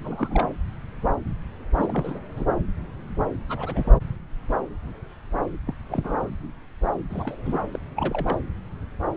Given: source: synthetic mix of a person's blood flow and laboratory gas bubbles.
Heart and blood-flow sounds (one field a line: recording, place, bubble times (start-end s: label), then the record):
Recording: Doppler ultrasound of blood flow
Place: subclavian vein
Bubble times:
0.04-0.47 s: bubbles
1.76-2.20 s: bubbles
2.36-2.44 s: bubbles
3.49-3.94 s: bubbles
5.67-5.73 s: bubbles
5.89-6.30 s: bubbles
7.09-7.35 s: bubbles
7.45-7.60 s: bubbles
7.73-7.78 s: bubbles
7.95-8.38 s: bubbles
From the record:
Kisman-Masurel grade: 221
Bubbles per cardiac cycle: several, 3 to 8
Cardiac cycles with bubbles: 10 to 50%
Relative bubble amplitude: barely perceptible (0.100 to 0.250)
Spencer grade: 2 (many but less than half of the cardiac periods contain bubble signals, singularly or in groups)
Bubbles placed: anywhere in the cardiac cycle